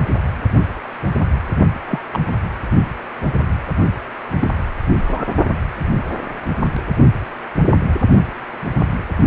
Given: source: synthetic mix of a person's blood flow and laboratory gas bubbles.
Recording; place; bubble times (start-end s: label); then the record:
Doppler ultrasound of blood flow; precordium
1.85-2.00 s: bubbles
2.12-2.19 s: bubbles
4.39-4.48 s: bubbles
5.07-5.26 s: bubbles
From the record:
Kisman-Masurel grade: 122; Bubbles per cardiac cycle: 1 to 2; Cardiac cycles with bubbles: 10 to 50%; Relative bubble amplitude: moderate (0.250 to 0.450); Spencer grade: 2 (many but less than half of the cardiac periods contain bubble signals, singularly or in groups); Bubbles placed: only in the low amplitude regions of the cardiac cycle